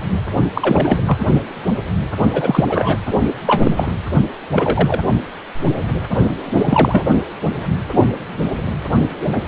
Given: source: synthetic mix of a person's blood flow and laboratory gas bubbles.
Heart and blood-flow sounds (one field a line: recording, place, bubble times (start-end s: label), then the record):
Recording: Doppler ultrasound of blood flow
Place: precordium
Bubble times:
0.55-0.98 s: bubbles
1.06-1.17 s: bubbles
2.33-2.65 s: bubbles
2.69-2.97 s: bubbles
3.46-3.92 s: bubbles
4.54-5.00 s: bubbles
6.51-7.07 s: bubbles
From the record:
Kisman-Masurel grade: 233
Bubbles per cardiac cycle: several, 3 to 8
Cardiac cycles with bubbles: 50 to 99%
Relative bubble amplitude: loud (0.450 to 0.775)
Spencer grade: 3 (all of the cardiac periods contain showers or single bubble signals, but not dominating or overriding the cardiac motion signals)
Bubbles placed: only in the low amplitude regions of the cardiac cycle